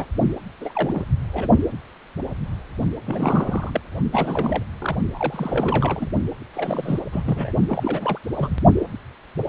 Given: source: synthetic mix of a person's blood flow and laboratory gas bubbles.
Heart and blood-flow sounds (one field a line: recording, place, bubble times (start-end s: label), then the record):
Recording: Doppler ultrasound of blood flow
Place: precordium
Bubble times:
0.00-0.05 s: bubbles
0.60-1.07 s: bubbles
1.33-1.48 s: bubbles
3.06-3.71 s: bubbles
3.74-3.80 s: bubbles
4.12-4.63 s: bubbles
4.80-4.96 s: bubbles
5.15-6.11 s: bubbles
6.54-7.00 s: bubbles
7.12-7.22 s: bubbles
7.25-7.53 s: bubbles
7.68-8.19 s: bubbles
8.36-8.49 s: bubbles
From the record:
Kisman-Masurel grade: 332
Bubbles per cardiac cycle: rolling drumbeat, 9 or more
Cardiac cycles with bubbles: 50 to 99%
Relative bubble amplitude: moderate (0.250 to 0.450)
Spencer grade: 3 (all of the cardiac periods contain showers or single bubble signals, but not dominating or overriding the cardiac motion signals)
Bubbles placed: only in the low amplitude regions of the cardiac cycle